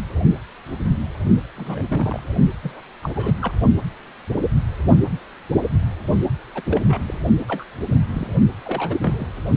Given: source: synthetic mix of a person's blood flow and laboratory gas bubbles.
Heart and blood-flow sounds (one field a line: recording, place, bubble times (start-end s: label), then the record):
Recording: Doppler ultrasound of blood flow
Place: precordium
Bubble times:
1.56-1.83 s: bubbles
1.90-2.19 s: bubbles
2.62-2.81 s: bubbles
3.02-3.11 s: bubbles
3.15-3.33 s: bubbles
3.42-3.54 s: bubbles
6.54-6.62 s: bubbles
6.66-6.80 s: bubbles
6.87-7.01 s: bubbles
7.07-7.21 s: bubbles
7.47-7.64 s: bubbles
7.92-7.95 s: bubbles
8.13-8.27 s: bubbles
8.65-8.96 s: bubbles
9.01-9.32 s: bubbles
From the record:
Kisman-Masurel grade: 232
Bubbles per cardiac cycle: several, 3 to 8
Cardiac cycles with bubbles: 50 to 99%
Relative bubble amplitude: moderate (0.250 to 0.450)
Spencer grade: 3 (all of the cardiac periods contain showers or single bubble signals, but not dominating or overriding the cardiac motion signals)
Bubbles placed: only in the low amplitude regions of the cardiac cycle